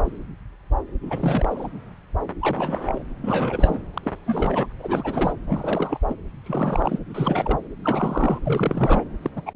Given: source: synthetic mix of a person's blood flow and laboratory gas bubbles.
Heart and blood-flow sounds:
Doppler ultrasound of blood flow; subclavian vein
1.03-1.69 s: bubbles
2.40-3.02 s: bubbles
3.22-3.81 s: bubbles
3.94-4.11 s: bubbles
4.25-4.67 s: bubbles
4.79-5.33 s: bubbles
5.47-5.98 s: bubbles
6.07-6.14 s: bubbles
6.45-6.99 s: bubbles
7.09-7.58 s: bubbles
7.84-8.39 s: bubbles
8.46-9.04 s: bubbles
9.22-9.30 s: bubbles
9.36-9.41 s: bubbles
9.46-9.52 s: bubbles
From the record:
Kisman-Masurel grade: 332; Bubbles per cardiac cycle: rolling drumbeat, 9 or more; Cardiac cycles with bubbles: 50 to 99%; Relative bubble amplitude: moderate (0.250 to 0.450); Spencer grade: 3 (all of the cardiac periods contain showers or single bubble signals, but not dominating or overriding the cardiac motion signals); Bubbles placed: anywhere in the cardiac cycle

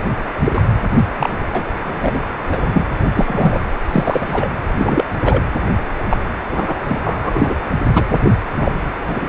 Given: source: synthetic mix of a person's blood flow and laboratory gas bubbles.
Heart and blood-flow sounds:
Doppler ultrasound of blood flow; precordium
0.42-0.62 s: bubbles
0.99-1.05 s: bubbles
1.19-1.29 s: bubbles
1.53-1.62 s: bubbles
1.84-2.19 s: bubbles
2.47-2.87 s: bubbles
3.14-3.61 s: bubbles
3.89-4.49 s: bubbles
4.77-5.10 s: bubbles
5.23-5.42 s: bubbles
6.10-6.17 s: bubbles
6.51-6.75 s: bubbles
6.88-6.99 s: bubbles
7.04-7.55 s: bubbles
7.93-8.06 s: bubbles
8.09-8.19 s: bubbles
8.22-8.32 s: bubbles
8.59-8.72 s: bubbles
9.08-9.29 s: bubbles
From the record:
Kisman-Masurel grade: 243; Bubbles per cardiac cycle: several, 3 to 8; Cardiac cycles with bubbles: 100%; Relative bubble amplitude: loud (0.450 to 0.775); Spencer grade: 3 (all of the cardiac periods contain showers or single bubble signals, but not dominating or overriding the cardiac motion signals); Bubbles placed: anywhere in the cardiac cycle

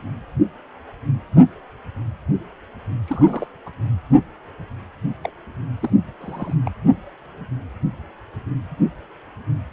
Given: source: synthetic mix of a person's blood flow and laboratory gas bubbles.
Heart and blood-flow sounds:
Doppler ultrasound of blood flow; precordium
3.08-3.46 s: bubbles
3.66-3.70 s: bubbles
5.23-5.29 s: bubbles
5.79-5.90 s: bubbles
6.21-6.54 s: bubbles
6.65-6.71 s: bubbles
From the record:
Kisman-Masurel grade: 221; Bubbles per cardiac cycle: several, 3 to 8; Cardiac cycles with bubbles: 10 to 50%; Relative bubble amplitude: barely perceptible (0.100 to 0.250); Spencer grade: 2 (many but less than half of the cardiac periods contain bubble signals, singularly or in groups); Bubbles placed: only in the low amplitude regions of the cardiac cycle

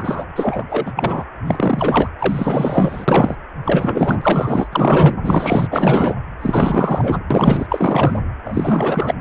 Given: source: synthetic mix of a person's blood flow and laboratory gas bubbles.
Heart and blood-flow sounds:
Doppler ultrasound of blood flow; precordium
0.00-0.26 s: bubbles
0.35-0.64 s: bubbles
0.69-0.93 s: bubbles
0.96-1.23 s: bubbles
1.45-2.08 s: bubbles
2.19-3.35 s: bubbles
3.64-4.68 s: bubbles
4.71-5.16 s: bubbles
5.22-5.67 s: bubbles
5.71-6.15 s: bubbles
6.39-7.20 s: bubbles
7.30-8.20 s: bubbles
8.45-9.14 s: bubbles
From the record:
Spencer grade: 4 (maximum detectable bubble signal sounding continuously throughout systole and diastole of every cardiac period, and overriding the amplitude of the normal cardiac signals); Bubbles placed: anywhere in the cardiac cycle

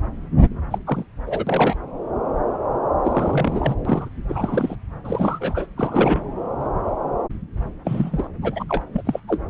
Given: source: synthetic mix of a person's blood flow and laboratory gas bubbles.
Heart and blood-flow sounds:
Doppler ultrasound of blood flow; subclavian vein
0.70-0.78 s: bubbles
0.86-1.04 s: bubbles
1.25-1.76 s: bubbles
3.04-3.75 s: bubbles
3.85-4.09 s: bubbles
4.28-4.76 s: bubbles
5.04-5.66 s: bubbles
5.77-6.24 s: bubbles
7.84-8.28 s: bubbles
8.41-8.64 s: bubbles
8.68-8.83 s: bubbles
8.93-9.02 s: bubbles
9.05-9.20 s: bubbles
9.27-9.41 s: bubbles
From the record:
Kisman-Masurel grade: 233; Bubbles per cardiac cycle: several, 3 to 8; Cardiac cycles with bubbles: 50 to 99%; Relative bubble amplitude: loud (0.450 to 0.775); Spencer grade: 3 (all of the cardiac periods contain showers or single bubble signals, but not dominating or overriding the cardiac motion signals); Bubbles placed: anywhere in the cardiac cycle

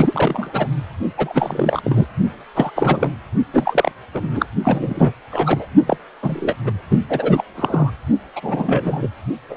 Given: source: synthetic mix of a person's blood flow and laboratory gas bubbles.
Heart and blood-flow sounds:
Doppler ultrasound of blood flow; precordium
0.00-0.67 s: bubbles
1.17-1.81 s: bubbles
1.84-2.06 s: bubbles
2.54-2.71 s: bubbles
2.75-3.12 s: bubbles
3.53-3.92 s: bubbles
4.14-4.28 s: bubbles
4.32-4.46 s: bubbles
4.64-5.13 s: bubbles
5.30-5.67 s: bubbles
5.87-5.97 s: bubbles
6.22-6.57 s: bubbles
6.65-6.71 s: bubbles
6.91-7.00 s: bubbles
7.09-7.43 s: bubbles
7.56-7.90 s: bubbles
8.36-9.09 s: bubbles
9.49-9.57 s: bubbles
From the record:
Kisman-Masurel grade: 343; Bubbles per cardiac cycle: rolling drumbeat, 9 or more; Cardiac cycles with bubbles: 100%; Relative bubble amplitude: loud (0.450 to 0.775); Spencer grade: 3 (all of the cardiac periods contain showers or single bubble signals, but not dominating or overriding the cardiac motion signals); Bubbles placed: only in the low amplitude regions of the cardiac cycle

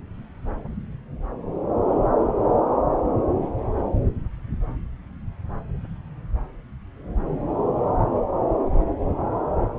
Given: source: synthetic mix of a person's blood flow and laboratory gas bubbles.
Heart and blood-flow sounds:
Doppler ultrasound of blood flow; subclavian vein
no bubbles
From the record:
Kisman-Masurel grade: 000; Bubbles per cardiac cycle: 0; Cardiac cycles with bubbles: 0%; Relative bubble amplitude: no bubbles discernible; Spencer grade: 0 (complete lack of bubble signals)

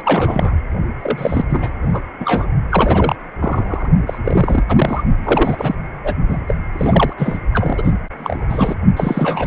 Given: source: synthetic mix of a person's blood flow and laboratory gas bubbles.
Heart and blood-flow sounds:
Doppler ultrasound of blood flow; precordium
0.00-0.02 s: bubbles
0.04-0.57 s: bubbles
0.99-1.45 s: bubbles
1.50-1.73 s: bubbles
1.81-2.03 s: bubbles
2.19-2.46 s: bubbles
2.69-3.15 s: bubbles
3.40-3.88 s: bubbles
4.07-4.18 s: bubbles
4.25-4.63 s: bubbles
4.68-5.03 s: bubbles
5.24-5.75 s: bubbles
6.04-6.14 s: bubbles
6.29-6.41 s: bubbles
6.47-6.54 s: bubbles
6.72-7.13 s: bubbles
7.17-7.39 s: bubbles
7.53-7.93 s: bubbles
8.18-8.46 s: bubbles
8.49-8.75 s: bubbles
8.96-9.47 s: bubbles
From the record:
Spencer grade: 3 (all of the cardiac periods contain showers or single bubble signals, but not dominating or overriding the cardiac motion signals); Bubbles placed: only in the low amplitude regions of the cardiac cycle

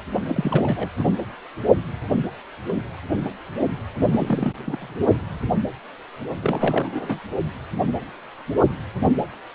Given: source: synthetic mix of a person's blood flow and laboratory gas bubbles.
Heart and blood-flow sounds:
Doppler ultrasound of blood flow; precordium
0.25-0.89 s: bubbles
0.98-1.10 s: bubbles
4.12-4.53 s: bubbles
4.66-4.96 s: bubbles
6.42-7.20 s: bubbles
From the record:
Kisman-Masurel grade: 222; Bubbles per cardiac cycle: several, 3 to 8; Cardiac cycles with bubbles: 10 to 50%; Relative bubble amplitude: moderate (0.250 to 0.450); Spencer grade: 2 (many but less than half of the cardiac periods contain bubble signals, singularly or in groups); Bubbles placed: only in the low amplitude regions of the cardiac cycle

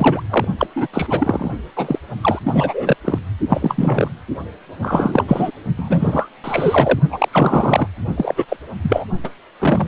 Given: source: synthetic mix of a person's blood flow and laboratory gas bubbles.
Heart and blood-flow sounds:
Doppler ultrasound of blood flow; precordium
0.00-0.23 s: bubbles
0.30-0.45 s: bubbles
0.58-0.67 s: bubbles
0.75-0.88 s: bubbles
0.93-1.51 s: bubbles
1.76-1.99 s: bubbles
2.21-2.40 s: bubbles
2.45-2.97 s: bubbles
3.04-3.19 s: bubbles
3.49-4.08 s: bubbles
4.82-5.25 s: bubbles
5.27-5.51 s: bubbles
5.76-6.29 s: bubbles
6.44-7.00 s: bubbles
7.09-7.29 s: bubbles
7.31-7.88 s: bubbles
8.17-8.45 s: bubbles
8.48-8.56 s: bubbles
8.81-9.05 s: bubbles
9.23-9.30 s: bubbles
9.59-9.88 s: bubbles
From the record:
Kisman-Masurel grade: 333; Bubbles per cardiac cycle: rolling drumbeat, 9 or more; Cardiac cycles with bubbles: 50 to 99%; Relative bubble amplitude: loud (0.450 to 0.775); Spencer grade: 3 (all of the cardiac periods contain showers or single bubble signals, but not dominating or overriding the cardiac motion signals); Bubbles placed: only in the low amplitude regions of the cardiac cycle

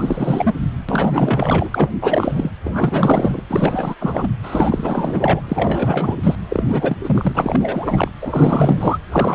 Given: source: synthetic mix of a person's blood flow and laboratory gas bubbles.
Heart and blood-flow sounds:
Doppler ultrasound of blood flow; precordium
0.00-0.54 s: bubbles
0.88-1.98 s: bubbles
2.01-2.50 s: bubbles
2.63-3.44 s: bubbles
3.49-3.96 s: bubbles
4.00-4.30 s: bubbles
4.42-5.41 s: bubbles
5.48-6.17 s: bubbles
6.22-6.35 s: bubbles
6.50-6.96 s: bubbles
7.03-8.11 s: bubbles
8.21-8.98 s: bubbles
9.12-9.35 s: bubbles
From the record:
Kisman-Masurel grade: 444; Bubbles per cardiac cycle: continuous sound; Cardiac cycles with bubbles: 100%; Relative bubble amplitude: maximal (0.775 to 0.999); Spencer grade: 4 (maximum detectable bubble signal sounding continuously throughout systole and diastole of every cardiac period, and overriding the amplitude of the normal cardiac signals); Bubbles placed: anywhere in the cardiac cycle

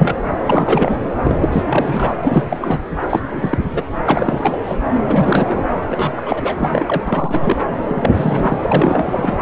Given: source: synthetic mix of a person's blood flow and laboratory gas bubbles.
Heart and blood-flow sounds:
Doppler ultrasound of blood flow; subclavian vein
0.00-0.16 s: bubbles
0.46-1.01 s: bubbles
1.23-1.37 s: bubbles
1.40-1.49 s: bubbles
1.52-1.65 s: bubbles
1.67-2.15 s: bubbles
2.23-2.58 s: bubbles
2.61-2.79 s: bubbles
3.02-3.06 s: bubbles
3.09-3.21 s: bubbles
3.33-3.58 s: bubbles
3.72-3.83 s: bubbles
4.05-4.62 s: bubbles
4.66-4.76 s: bubbles
5.02-5.64 s: bubbles
5.89-6.22 s: bubbles
6.25-7.04 s: bubbles
7.07-7.57 s: bubbles
7.79-8.12 s: bubbles
8.15-9.38 s: bubbles
From the record:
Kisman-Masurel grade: 342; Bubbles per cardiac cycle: rolling drumbeat, 9 or more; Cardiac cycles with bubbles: 100%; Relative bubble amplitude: moderate (0.250 to 0.450); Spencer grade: 3 (all of the cardiac periods contain showers or single bubble signals, but not dominating or overriding the cardiac motion signals); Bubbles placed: anywhere in the cardiac cycle

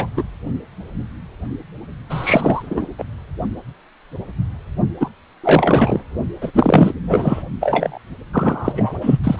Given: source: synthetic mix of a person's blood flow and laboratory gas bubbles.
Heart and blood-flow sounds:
Doppler ultrasound of blood flow; precordium
0.00-0.07 s: bubbles
0.16-0.23 s: bubbles
2.09-2.93 s: bubbles
2.98-3.04 s: bubbles
5.00-5.09 s: bubbles
5.43-6.00 s: bubbles
6.41-6.51 s: bubbles
6.54-6.93 s: bubbles
7.07-7.42 s: bubbles
7.60-7.99 s: bubbles
8.33-9.18 s: bubbles
9.24-9.40 s: bubbles
From the record:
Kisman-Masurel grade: 333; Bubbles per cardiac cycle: rolling drumbeat, 9 or more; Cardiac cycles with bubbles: 50 to 99%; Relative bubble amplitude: loud (0.450 to 0.775); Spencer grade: 3 (all of the cardiac periods contain showers or single bubble signals, but not dominating or overriding the cardiac motion signals); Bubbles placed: only in the low amplitude regions of the cardiac cycle

